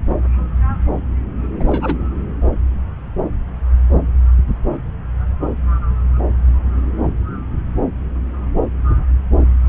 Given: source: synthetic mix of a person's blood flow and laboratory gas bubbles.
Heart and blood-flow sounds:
Doppler ultrasound of blood flow; subclavian vein
1.59-1.98 s: bubbles
From the record:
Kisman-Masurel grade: 212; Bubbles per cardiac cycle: several, 3 to 8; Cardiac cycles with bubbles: 1 to 10%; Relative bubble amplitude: moderate (0.250 to 0.450); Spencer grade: 1 (occasional bubble signal discernible with the cardiac motion signal, with majority of cardiac periods free of bubbles); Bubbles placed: anywhere in the cardiac cycle

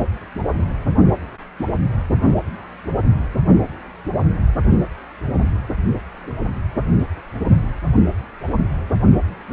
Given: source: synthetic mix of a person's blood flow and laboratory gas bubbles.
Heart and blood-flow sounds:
Doppler ultrasound of blood flow; precordium
7.22-7.68 s: bubbles
From the record:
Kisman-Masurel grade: 111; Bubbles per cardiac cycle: 1 to 2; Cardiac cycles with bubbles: 1 to 10%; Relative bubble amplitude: barely perceptible (0.100 to 0.250); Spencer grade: 1 (occasional bubble signal discernible with the cardiac motion signal, with majority of cardiac periods free of bubbles); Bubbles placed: anywhere in the cardiac cycle

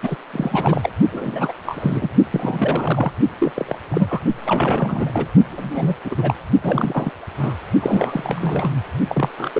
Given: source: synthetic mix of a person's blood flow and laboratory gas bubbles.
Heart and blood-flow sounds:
Doppler ultrasound of blood flow; precordium
0.02-0.16 s: bubbles
0.33-0.89 s: bubbles
1.12-1.52 s: bubbles
1.66-2.09 s: bubbles
2.32-3.12 s: bubbles
3.38-3.51 s: bubbles
3.55-3.78 s: bubbles
3.91-4.21 s: bubbles
4.45-5.26 s: bubbles
5.49-5.96 s: bubbles
6.04-6.35 s: bubbles
6.59-7.10 s: bubbles
7.39-7.54 s: bubbles
7.80-8.71 s: bubbles
9.09-9.29 s: bubbles
9.38-9.51 s: bubbles
9.54-9.60 s: bubbles
From the record:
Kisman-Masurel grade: 342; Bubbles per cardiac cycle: rolling drumbeat, 9 or more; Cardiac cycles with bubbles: 100%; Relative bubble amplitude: moderate (0.250 to 0.450); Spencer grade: 3 (all of the cardiac periods contain showers or single bubble signals, but not dominating or overriding the cardiac motion signals); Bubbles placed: only in the low amplitude regions of the cardiac cycle

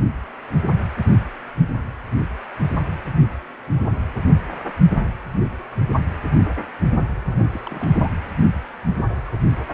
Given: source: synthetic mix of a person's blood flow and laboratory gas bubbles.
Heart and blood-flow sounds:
Doppler ultrasound of blood flow; precordium
7.30-7.47 s: bubbles
7.51-7.62 s: bubbles
7.64-8.11 s: bubbles
From the record:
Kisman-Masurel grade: 211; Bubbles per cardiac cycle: several, 3 to 8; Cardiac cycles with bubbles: 1 to 10%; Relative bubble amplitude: barely perceptible (0.100 to 0.250); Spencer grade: 1 (occasional bubble signal discernible with the cardiac motion signal, with majority of cardiac periods free of bubbles); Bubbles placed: anywhere in the cardiac cycle

